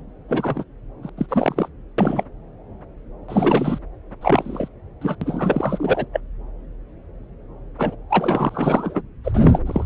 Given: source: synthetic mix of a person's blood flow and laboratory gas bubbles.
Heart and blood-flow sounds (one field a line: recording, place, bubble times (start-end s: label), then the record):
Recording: Doppler ultrasound of blood flow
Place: subclavian vein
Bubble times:
0.28-0.64 s: bubbles
1.02-1.09 s: bubbles
1.17-1.26 s: bubbles
1.28-1.69 s: bubbles
1.98-2.23 s: bubbles
3.28-3.79 s: bubbles
4.21-4.68 s: bubbles
5.01-5.16 s: bubbles
5.21-6.06 s: bubbles
6.12-6.21 s: bubbles
7.78-7.96 s: bubbles
8.10-9.02 s: bubbles
9.24-9.61 s: bubbles
9.66-9.85 s: bubbles
From the record:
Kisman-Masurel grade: 233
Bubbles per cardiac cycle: several, 3 to 8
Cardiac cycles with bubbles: 50 to 99%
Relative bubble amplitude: loud (0.450 to 0.775)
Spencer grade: 3 (all of the cardiac periods contain showers or single bubble signals, but not dominating or overriding the cardiac motion signals)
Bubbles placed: anywhere in the cardiac cycle